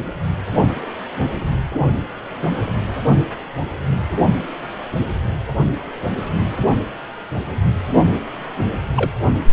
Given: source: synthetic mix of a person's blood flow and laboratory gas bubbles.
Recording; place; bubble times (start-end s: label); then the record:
Doppler ultrasound of blood flow; precordium
8.96-9.11 s: bubbles
From the record:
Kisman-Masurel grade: 112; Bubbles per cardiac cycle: 1 to 2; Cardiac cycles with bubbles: 1 to 10%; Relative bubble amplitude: moderate (0.250 to 0.450); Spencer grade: 1 (occasional bubble signal discernible with the cardiac motion signal, with majority of cardiac periods free of bubbles); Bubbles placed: only in the low amplitude regions of the cardiac cycle